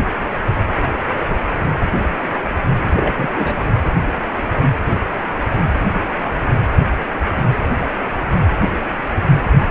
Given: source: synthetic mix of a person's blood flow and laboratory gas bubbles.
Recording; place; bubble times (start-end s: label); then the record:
Doppler ultrasound of blood flow; precordium
2.96-3.29 s: bubbles
3.35-3.60 s: bubbles
From the record:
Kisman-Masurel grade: 212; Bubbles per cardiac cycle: several, 3 to 8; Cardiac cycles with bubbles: 1 to 10%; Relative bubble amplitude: moderate (0.250 to 0.450); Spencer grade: 1 (occasional bubble signal discernible with the cardiac motion signal, with majority of cardiac periods free of bubbles); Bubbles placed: anywhere in the cardiac cycle